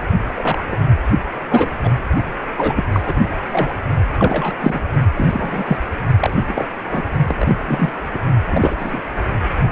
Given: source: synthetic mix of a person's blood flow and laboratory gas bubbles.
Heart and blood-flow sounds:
Doppler ultrasound of blood flow; precordium
0.25-0.64 s: bubbles
0.71-0.77 s: bubbles
1.49-1.76 s: bubbles
1.83-1.90 s: bubbles
2.57-2.85 s: bubbles
2.92-3.02 s: bubbles
3.05-3.27 s: bubbles
3.52-3.75 s: bubbles
4.18-4.54 s: bubbles
4.59-4.80 s: bubbles
5.15-5.76 s: bubbles
6.20-6.42 s: bubbles
6.47-6.67 s: bubbles
6.91-7.04 s: bubbles
7.28-7.36 s: bubbles
7.38-7.56 s: bubbles
7.67-7.92 s: bubbles
8.12-8.21 s: bubbles
8.51-9.03 s: bubbles
From the record:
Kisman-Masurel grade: 243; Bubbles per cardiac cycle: several, 3 to 8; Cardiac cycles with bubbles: 100%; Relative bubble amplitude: loud (0.450 to 0.775); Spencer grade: 3 (all of the cardiac periods contain showers or single bubble signals, but not dominating or overriding the cardiac motion signals); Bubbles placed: only in the low amplitude regions of the cardiac cycle

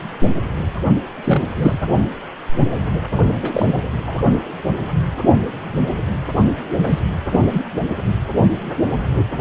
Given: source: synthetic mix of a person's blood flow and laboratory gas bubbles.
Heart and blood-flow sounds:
Doppler ultrasound of blood flow; precordium
1.24-1.55 s: bubbles
1.58-1.79 s: bubbles
3.42-3.81 s: bubbles
4.06-4.21 s: bubbles
6.83-7.00 s: bubbles
7.30-7.41 s: bubbles
7.51-7.62 s: bubbles
From the record:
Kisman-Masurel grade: 222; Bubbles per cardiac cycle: several, 3 to 8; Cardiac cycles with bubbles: 10 to 50%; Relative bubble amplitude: moderate (0.250 to 0.450); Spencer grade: 2 (many but less than half of the cardiac periods contain bubble signals, singularly or in groups); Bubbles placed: only in the low amplitude regions of the cardiac cycle

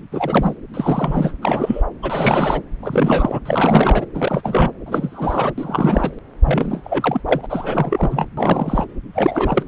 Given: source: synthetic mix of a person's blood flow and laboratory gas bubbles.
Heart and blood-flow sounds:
Doppler ultrasound of blood flow; subclavian vein
0.11-0.54 s: bubbles
0.73-1.33 s: bubbles
1.42-1.82 s: bubbles
2.03-2.61 s: bubbles
2.82-3.39 s: bubbles
3.45-4.06 s: bubbles
4.15-4.71 s: bubbles
4.86-5.52 s: bubbles
5.58-6.11 s: bubbles
6.44-7.21 s: bubbles
7.25-7.46 s: bubbles
7.50-8.26 s: bubbles
8.37-8.85 s: bubbles
9.13-9.63 s: bubbles
From the record:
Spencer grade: 3 (all of the cardiac periods contain showers or single bubble signals, but not dominating or overriding the cardiac motion signals); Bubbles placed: anywhere in the cardiac cycle

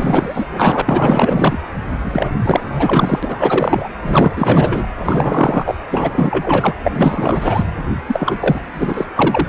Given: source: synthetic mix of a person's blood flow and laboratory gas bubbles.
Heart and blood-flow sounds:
Doppler ultrasound of blood flow; precordium
0.00-0.46 s: bubbles
0.53-0.81 s: bubbles
0.86-1.57 s: bubbles
1.99-2.30 s: bubbles
2.43-3.19 s: bubbles
3.22-3.89 s: bubbles
4.01-4.86 s: bubbles
4.98-5.75 s: bubbles
5.90-6.73 s: bubbles
6.83-7.65 s: bubbles
8.07-8.61 s: bubbles
8.74-9.06 s: bubbles
9.15-9.49 s: bubbles
From the record:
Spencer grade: 4 (maximum detectable bubble signal sounding continuously throughout systole and diastole of every cardiac period, and overriding the amplitude of the normal cardiac signals); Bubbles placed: anywhere in the cardiac cycle

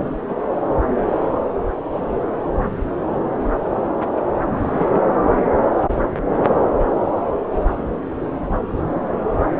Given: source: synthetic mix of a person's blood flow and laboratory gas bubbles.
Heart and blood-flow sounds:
Doppler ultrasound of blood flow; subclavian vein
0.29-0.34 s: bubbles
4.52-5.00 s: bubbles
From the record:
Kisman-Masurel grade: 122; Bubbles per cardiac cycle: 1 to 2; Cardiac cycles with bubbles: 10 to 50%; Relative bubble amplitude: moderate (0.250 to 0.450); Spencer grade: 2 (many but less than half of the cardiac periods contain bubble signals, singularly or in groups); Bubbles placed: anywhere in the cardiac cycle

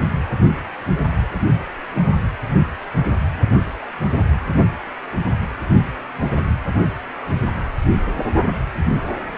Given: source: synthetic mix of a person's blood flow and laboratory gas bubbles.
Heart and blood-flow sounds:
Doppler ultrasound of blood flow; precordium
no bubbles
From the record:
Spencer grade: 0 (complete lack of bubble signals)

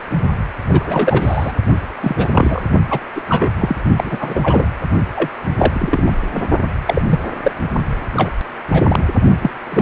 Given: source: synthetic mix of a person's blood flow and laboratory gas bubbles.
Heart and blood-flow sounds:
Doppler ultrasound of blood flow; precordium
0.69-1.53 s: bubbles
2.02-2.62 s: bubbles
2.90-3.00 s: bubbles
3.15-3.22 s: bubbles
3.28-3.52 s: bubbles
3.59-3.76 s: bubbles
3.97-4.18 s: bubbles
4.21-4.71 s: bubbles
5.15-5.30 s: bubbles
5.58-6.11 s: bubbles
6.36-6.45 s: bubbles
6.86-7.02 s: bubbles
7.08-7.20 s: bubbles
7.43-7.52 s: bubbles
8.13-8.31 s: bubbles
8.71-9.04 s: bubbles
9.41-9.51 s: bubbles
9.71-9.82 s: bubbles
From the record:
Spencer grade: 3 (all of the cardiac periods contain showers or single bubble signals, but not dominating or overriding the cardiac motion signals); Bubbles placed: only in the low amplitude regions of the cardiac cycle

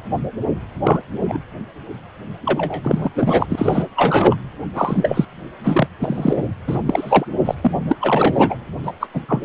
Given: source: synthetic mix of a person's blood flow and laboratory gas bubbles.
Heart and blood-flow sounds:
Doppler ultrasound of blood flow; precordium
0.84-1.01 s: bubbles
1.19-1.39 s: bubbles
2.46-3.10 s: bubbles
3.15-3.84 s: bubbles
3.96-4.35 s: bubbles
4.75-5.25 s: bubbles
5.64-5.87 s: bubbles
6.00-6.48 s: bubbles
6.67-6.79 s: bubbles
6.85-7.25 s: bubbles
7.45-7.55 s: bubbles
7.62-7.71 s: bubbles
7.88-7.96 s: bubbles
8.00-8.56 s: bubbles
8.83-8.91 s: bubbles
9.00-9.07 s: bubbles
9.13-9.21 s: bubbles
9.28-9.44 s: bubbles
From the record:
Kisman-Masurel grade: 233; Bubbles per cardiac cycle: several, 3 to 8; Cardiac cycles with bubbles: 50 to 99%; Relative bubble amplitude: loud (0.450 to 0.775); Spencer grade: 3 (all of the cardiac periods contain showers or single bubble signals, but not dominating or overriding the cardiac motion signals); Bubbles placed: anywhere in the cardiac cycle

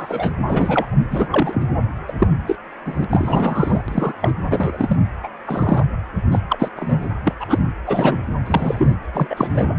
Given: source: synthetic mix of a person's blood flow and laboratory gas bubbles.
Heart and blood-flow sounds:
Doppler ultrasound of blood flow; precordium
0.00-0.32 s: bubbles
0.48-0.95 s: bubbles
1.10-1.27 s: bubbles
1.31-1.67 s: bubbles
2.08-2.13 s: bubbles
2.19-2.27 s: bubbles
2.47-2.58 s: bubbles
2.85-3.04 s: bubbles
3.10-3.83 s: bubbles
3.88-4.13 s: bubbles
4.22-4.33 s: bubbles
4.50-4.96 s: bubbles
5.23-5.29 s: bubbles
5.45-5.85 s: bubbles
6.32-6.41 s: bubbles
6.49-6.69 s: bubbles
6.76-7.13 s: bubbles
7.24-7.36 s: bubbles
7.40-7.59 s: bubbles
7.86-8.17 s: bubbles
8.45-8.95 s: bubbles
9.12-9.27 s: bubbles
9.30-9.74 s: bubbles
From the record:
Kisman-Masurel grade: 242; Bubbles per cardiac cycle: several, 3 to 8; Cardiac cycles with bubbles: 100%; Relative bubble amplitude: moderate (0.250 to 0.450); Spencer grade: 3 (all of the cardiac periods contain showers or single bubble signals, but not dominating or overriding the cardiac motion signals); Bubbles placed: anywhere in the cardiac cycle

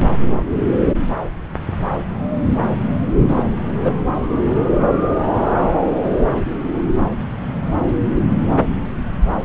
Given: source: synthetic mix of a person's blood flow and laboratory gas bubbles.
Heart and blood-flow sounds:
Doppler ultrasound of blood flow; subclavian vein
3.28-3.44 s: bubbles
3.83-3.92 s: bubbles
From the record:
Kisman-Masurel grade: 213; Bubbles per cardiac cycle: several, 3 to 8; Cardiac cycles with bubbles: 1 to 10%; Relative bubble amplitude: loud (0.450 to 0.775); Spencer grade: 1 (occasional bubble signal discernible with the cardiac motion signal, with majority of cardiac periods free of bubbles); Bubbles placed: anywhere in the cardiac cycle

